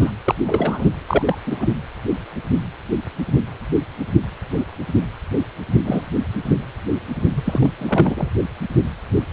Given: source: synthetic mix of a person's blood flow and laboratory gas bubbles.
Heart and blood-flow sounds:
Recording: Doppler ultrasound of blood flow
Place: precordium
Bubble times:
0.00-0.11 s: bubbles
0.24-0.35 s: bubbles
0.47-0.91 s: bubbles
1.08-1.22 s: bubbles
1.26-1.38 s: bubbles
1.47-1.66 s: bubbles
5.84-6.06 s: bubbles
7.34-7.70 s: bubbles
7.78-8.29 s: bubbles
From the record:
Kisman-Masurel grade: 232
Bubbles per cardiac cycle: several, 3 to 8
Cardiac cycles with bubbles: 50 to 99%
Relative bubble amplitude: moderate (0.250 to 0.450)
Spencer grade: 3 (all of the cardiac periods contain showers or single bubble signals, but not dominating or overriding the cardiac motion signals)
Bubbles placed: anywhere in the cardiac cycle

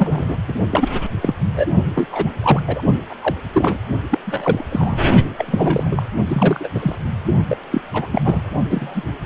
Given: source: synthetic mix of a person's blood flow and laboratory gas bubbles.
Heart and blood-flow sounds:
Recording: Doppler ultrasound of blood flow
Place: precordium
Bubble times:
0.00-0.37 s: bubbles
0.48-0.55 s: bubbles
0.71-0.89 s: bubbles
1.21-1.34 s: bubbles
1.56-1.67 s: bubbles
1.94-2.07 s: bubbles
2.12-2.30 s: bubbles
2.42-2.62 s: bubbles
2.67-2.82 s: bubbles
3.09-3.15 s: bubbles
3.21-3.35 s: bubbles
3.53-3.79 s: bubbles
4.10-4.19 s: bubbles
4.26-4.65 s: bubbles
4.70-4.99 s: bubbles
5.38-6.03 s: bubbles
6.29-6.69 s: bubbles
6.75-6.96 s: bubbles
7.49-7.57 s: bubbles
7.71-7.81 s: bubbles
7.93-8.42 s: bubbles
8.69-9.02 s: bubbles
From the record:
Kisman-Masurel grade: 233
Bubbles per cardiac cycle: several, 3 to 8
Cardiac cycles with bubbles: 50 to 99%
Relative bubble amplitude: loud (0.450 to 0.775)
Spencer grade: 3 (all of the cardiac periods contain showers or single bubble signals, but not dominating or overriding the cardiac motion signals)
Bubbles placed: only in the low amplitude regions of the cardiac cycle

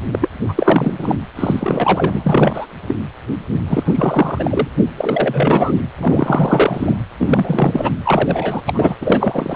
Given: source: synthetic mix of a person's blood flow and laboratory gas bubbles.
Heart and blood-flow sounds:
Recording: Doppler ultrasound of blood flow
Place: precordium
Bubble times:
0.12-0.28 s: bubbles
0.49-1.16 s: bubbles
1.35-2.67 s: bubbles
2.88-2.94 s: bubbles
3.67-4.68 s: bubbles
4.97-5.76 s: bubbles
5.97-6.96 s: bubbles
7.19-7.91 s: bubbles
8.05-8.62 s: bubbles
8.67-8.96 s: bubbles
9.01-9.56 s: bubbles
From the record:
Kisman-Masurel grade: 333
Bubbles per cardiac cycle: rolling drumbeat, 9 or more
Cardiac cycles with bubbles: 50 to 99%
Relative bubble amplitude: loud (0.450 to 0.775)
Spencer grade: 3 (all of the cardiac periods contain showers or single bubble signals, but not dominating or overriding the cardiac motion signals)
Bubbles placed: anywhere in the cardiac cycle

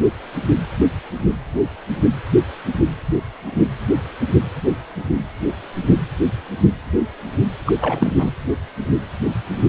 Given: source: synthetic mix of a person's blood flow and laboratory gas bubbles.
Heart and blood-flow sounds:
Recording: Doppler ultrasound of blood flow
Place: precordium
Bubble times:
7.66-7.73 s: bubbles
7.81-8.13 s: bubbles
8.19-8.32 s: bubbles
From the record:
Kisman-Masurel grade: 212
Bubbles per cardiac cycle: several, 3 to 8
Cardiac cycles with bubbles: 1 to 10%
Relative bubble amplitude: moderate (0.250 to 0.450)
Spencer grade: 1 (occasional bubble signal discernible with the cardiac motion signal, with majority of cardiac periods free of bubbles)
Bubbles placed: anywhere in the cardiac cycle

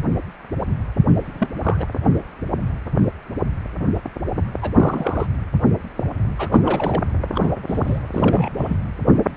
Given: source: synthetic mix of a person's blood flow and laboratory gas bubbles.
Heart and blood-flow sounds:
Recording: Doppler ultrasound of blood flow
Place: precordium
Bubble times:
1.24-1.48 s: bubbles
1.62-1.86 s: bubbles
4.62-4.71 s: bubbles
4.75-5.26 s: bubbles
6.38-6.49 s: bubbles
6.51-7.03 s: bubbles
7.32-7.54 s: bubbles
7.67-8.00 s: bubbles
8.12-8.77 s: bubbles
From the record:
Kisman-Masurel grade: 232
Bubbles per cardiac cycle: several, 3 to 8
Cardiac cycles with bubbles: 50 to 99%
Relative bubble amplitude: moderate (0.250 to 0.450)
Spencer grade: 3 (all of the cardiac periods contain showers or single bubble signals, but not dominating or overriding the cardiac motion signals)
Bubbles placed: anywhere in the cardiac cycle

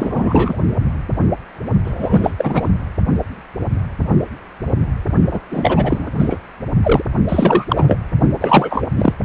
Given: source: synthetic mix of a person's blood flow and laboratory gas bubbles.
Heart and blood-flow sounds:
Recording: Doppler ultrasound of blood flow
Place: precordium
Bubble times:
0.00-0.57 s: bubbles
1.85-2.69 s: bubbles
5.31-5.40 s: bubbles
5.51-6.11 s: bubbles
6.19-6.41 s: bubbles
6.83-7.03 s: bubbles
7.29-7.98 s: bubbles
8.40-8.89 s: bubbles
8.96-9.13 s: bubbles
From the record:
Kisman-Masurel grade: 333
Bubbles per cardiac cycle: rolling drumbeat, 9 or more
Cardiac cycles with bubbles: 50 to 99%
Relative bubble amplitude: loud (0.450 to 0.775)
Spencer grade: 3 (all of the cardiac periods contain showers or single bubble signals, but not dominating or overriding the cardiac motion signals)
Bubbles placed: only in the low amplitude regions of the cardiac cycle

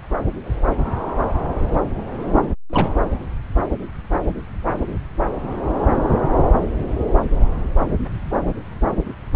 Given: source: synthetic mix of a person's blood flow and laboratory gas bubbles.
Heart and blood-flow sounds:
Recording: Doppler ultrasound of blood flow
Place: subclavian vein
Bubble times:
2.69-2.88 s: bubbles
From the record:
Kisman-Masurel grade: 112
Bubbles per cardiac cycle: 1 to 2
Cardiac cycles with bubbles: 1 to 10%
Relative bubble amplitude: moderate (0.250 to 0.450)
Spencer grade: 1 (occasional bubble signal discernible with the cardiac motion signal, with majority of cardiac periods free of bubbles)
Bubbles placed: anywhere in the cardiac cycle

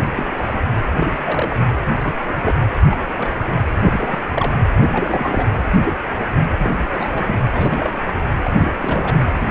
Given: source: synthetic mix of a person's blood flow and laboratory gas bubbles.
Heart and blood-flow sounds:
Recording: Doppler ultrasound of blood flow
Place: precordium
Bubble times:
0.15-0.26 s: bubbles
0.36-0.54 s: bubbles
0.98-1.17 s: bubbles
1.25-1.56 s: bubbles
2.01-2.14 s: bubbles
2.25-2.32 s: bubbles
2.44-2.58 s: bubbles
2.90-2.98 s: bubbles
3.17-3.30 s: bubbles
3.47-3.52 s: bubbles
3.78-4.19 s: bubbles
4.32-4.55 s: bubbles
4.78-4.89 s: bubbles
4.92-5.48 s: bubbles
5.54-5.70 s: bubbles
5.86-5.96 s: bubbles
6.18-6.25 s: bubbles
6.53-6.70 s: bubbles
6.94-7.35 s: bubbles
7.53-8.14 s: bubbles
8.44-8.51 s: bubbles
8.57-8.71 s: bubbles
8.80-9.26 s: bubbles
9.37-9.49 s: bubbles
From the record:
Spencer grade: 3 (all of the cardiac periods contain showers or single bubble signals, but not dominating or overriding the cardiac motion signals)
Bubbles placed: anywhere in the cardiac cycle

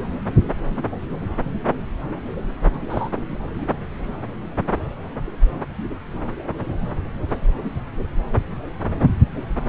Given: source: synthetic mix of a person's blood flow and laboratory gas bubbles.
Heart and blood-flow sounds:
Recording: Doppler ultrasound of blood flow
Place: subclavian vein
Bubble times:
2.90-3.09 s: bubbles
From the record:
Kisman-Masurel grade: 112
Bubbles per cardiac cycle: 1 to 2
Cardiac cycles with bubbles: 1 to 10%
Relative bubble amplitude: moderate (0.250 to 0.450)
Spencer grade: 1 (occasional bubble signal discernible with the cardiac motion signal, with majority of cardiac periods free of bubbles)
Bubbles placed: anywhere in the cardiac cycle

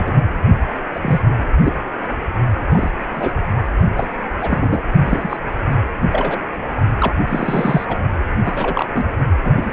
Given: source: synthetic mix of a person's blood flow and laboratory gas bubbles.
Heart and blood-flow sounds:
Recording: Doppler ultrasound of blood flow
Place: precordium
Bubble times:
0.00-0.11 s: bubbles
0.15-0.22 s: bubbles
0.94-1.21 s: bubbles
1.62-1.77 s: bubbles
2.70-2.91 s: bubbles
3.14-3.33 s: bubbles
3.96-4.17 s: bubbles
4.42-4.82 s: bubbles
5.06-5.37 s: bubbles
6.12-6.40 s: bubbles
7.00-7.14 s: bubbles
7.28-8.00 s: bubbles
8.44-8.89 s: bubbles
8.94-9.06 s: bubbles
9.44-9.52 s: bubbles
9.56-9.73 s: bubbles
From the record:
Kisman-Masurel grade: 242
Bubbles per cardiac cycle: several, 3 to 8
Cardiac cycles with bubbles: 100%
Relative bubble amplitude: moderate (0.250 to 0.450)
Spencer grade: 3 (all of the cardiac periods contain showers or single bubble signals, but not dominating or overriding the cardiac motion signals)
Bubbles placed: only in the low amplitude regions of the cardiac cycle

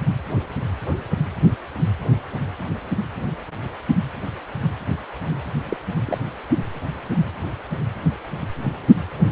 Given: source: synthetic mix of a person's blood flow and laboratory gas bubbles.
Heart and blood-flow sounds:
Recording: Doppler ultrasound of blood flow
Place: precordium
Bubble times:
5.65-5.77 s: bubbles
6.07-6.18 s: bubbles
From the record:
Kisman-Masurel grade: 111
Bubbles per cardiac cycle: 1 to 2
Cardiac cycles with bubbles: 1 to 10%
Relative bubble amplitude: barely perceptible (0.100 to 0.250)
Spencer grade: 1 (occasional bubble signal discernible with the cardiac motion signal, with majority of cardiac periods free of bubbles)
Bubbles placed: only in the low amplitude regions of the cardiac cycle

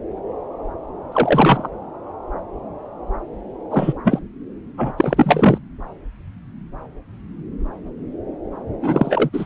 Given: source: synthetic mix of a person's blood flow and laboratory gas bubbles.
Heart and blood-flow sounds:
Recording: Doppler ultrasound of blood flow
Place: subclavian vein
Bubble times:
1.11-1.68 s: bubbles
3.71-3.93 s: bubbles
4.04-4.19 s: bubbles
4.77-4.92 s: bubbles
4.97-5.58 s: bubbles
8.82-9.29 s: bubbles
9.33-9.46 s: bubbles
From the record:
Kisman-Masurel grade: 233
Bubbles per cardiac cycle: several, 3 to 8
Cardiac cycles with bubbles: 50 to 99%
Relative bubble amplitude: loud (0.450 to 0.775)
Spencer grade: 3 (all of the cardiac periods contain showers or single bubble signals, but not dominating or overriding the cardiac motion signals)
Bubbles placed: anywhere in the cardiac cycle

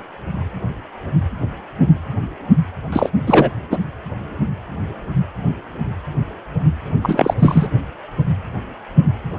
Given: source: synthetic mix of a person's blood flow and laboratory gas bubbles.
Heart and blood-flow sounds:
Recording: Doppler ultrasound of blood flow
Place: precordium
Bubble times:
2.92-3.10 s: bubbles
3.27-3.50 s: bubbles
3.71-3.78 s: bubbles
7.02-7.34 s: bubbles
7.38-7.67 s: bubbles
From the record:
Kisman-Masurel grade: 223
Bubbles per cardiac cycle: several, 3 to 8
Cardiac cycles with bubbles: 10 to 50%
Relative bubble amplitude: loud (0.450 to 0.775)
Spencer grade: 2 (many but less than half of the cardiac periods contain bubble signals, singularly or in groups)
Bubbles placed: anywhere in the cardiac cycle

